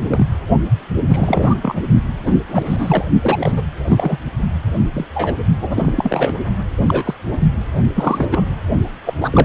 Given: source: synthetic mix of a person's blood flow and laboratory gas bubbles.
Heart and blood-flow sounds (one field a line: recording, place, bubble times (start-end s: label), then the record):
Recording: Doppler ultrasound of blood flow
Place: precordium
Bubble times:
0.10-0.27 s: bubbles
1.10-1.55 s: bubbles
1.62-1.82 s: bubbles
2.25-2.35 s: bubbles
2.48-3.04 s: bubbles
3.20-3.63 s: bubbles
3.85-4.19 s: bubbles
4.93-5.06 s: bubbles
5.14-5.35 s: bubbles
5.61-5.92 s: bubbles
5.96-6.32 s: bubbles
6.78-7.14 s: bubbles
7.31-7.38 s: bubbles
7.95-8.46 s: bubbles
9.05-9.14 s: bubbles
9.21-9.45 s: bubbles
From the record:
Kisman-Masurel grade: 242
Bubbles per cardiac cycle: several, 3 to 8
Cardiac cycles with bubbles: 100%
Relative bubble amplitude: moderate (0.250 to 0.450)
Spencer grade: 3 (all of the cardiac periods contain showers or single bubble signals, but not dominating or overriding the cardiac motion signals)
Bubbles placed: only in the low amplitude regions of the cardiac cycle